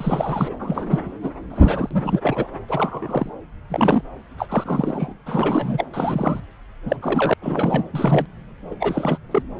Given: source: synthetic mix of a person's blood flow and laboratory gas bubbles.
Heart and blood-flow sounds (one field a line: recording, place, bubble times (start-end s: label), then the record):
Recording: Doppler ultrasound of blood flow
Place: subclavian vein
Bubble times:
0.00-0.55 s: bubbles
0.59-1.00 s: bubbles
1.23-1.30 s: bubbles
1.50-2.48 s: bubbles
2.67-3.29 s: bubbles
3.69-4.02 s: bubbles
4.38-5.14 s: bubbles
5.26-5.86 s: bubbles
5.94-6.40 s: bubbles
6.85-7.33 s: bubbles
7.42-7.83 s: bubbles
7.92-8.26 s: bubbles
8.71-8.76 s: bubbles
8.79-9.18 s: bubbles
9.31-9.42 s: bubbles
From the record:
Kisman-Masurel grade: 242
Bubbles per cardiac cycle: several, 3 to 8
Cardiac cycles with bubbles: 100%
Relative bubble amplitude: moderate (0.250 to 0.450)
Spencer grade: 3 (all of the cardiac periods contain showers or single bubble signals, but not dominating or overriding the cardiac motion signals)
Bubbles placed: anywhere in the cardiac cycle